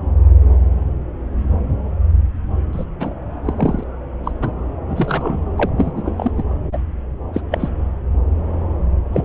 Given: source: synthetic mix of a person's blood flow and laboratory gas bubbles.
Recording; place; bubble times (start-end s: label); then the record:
Doppler ultrasound of blood flow; subclavian vein
2.73-2.85 s: bubbles
3.00-3.13 s: bubbles
3.45-3.53 s: bubbles
3.55-3.83 s: bubbles
4.24-4.32 s: bubbles
4.41-4.52 s: bubbles
4.88-5.43 s: bubbles
5.58-5.70 s: bubbles
5.78-5.92 s: bubbles
5.96-6.03 s: bubbles
6.05-6.31 s: bubbles
6.37-6.43 s: bubbles
6.72-6.78 s: bubbles
7.33-7.41 s: bubbles
7.51-7.69 s: bubbles
9.12-9.25 s: bubbles
From the record:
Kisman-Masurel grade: 232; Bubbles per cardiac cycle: several, 3 to 8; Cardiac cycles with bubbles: 50 to 99%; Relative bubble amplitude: moderate (0.250 to 0.450); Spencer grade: 3 (all of the cardiac periods contain showers or single bubble signals, but not dominating or overriding the cardiac motion signals); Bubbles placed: anywhere in the cardiac cycle